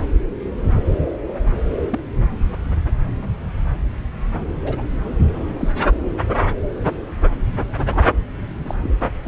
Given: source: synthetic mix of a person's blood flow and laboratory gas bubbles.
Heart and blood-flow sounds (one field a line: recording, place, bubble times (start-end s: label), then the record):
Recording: Doppler ultrasound of blood flow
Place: subclavian vein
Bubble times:
1.90-2.00 s: bubbles
4.61-4.82 s: bubbles
5.35-5.69 s: bubbles
7.86-8.01 s: bubbles
8.67-8.74 s: bubbles
8.83-8.89 s: bubbles
9.25-9.28 s: bubbles
From the record:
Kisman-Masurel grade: 121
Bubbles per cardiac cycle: 1 to 2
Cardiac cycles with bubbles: 10 to 50%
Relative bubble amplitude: barely perceptible (0.100 to 0.250)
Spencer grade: 2 (many but less than half of the cardiac periods contain bubble signals, singularly or in groups)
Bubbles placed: anywhere in the cardiac cycle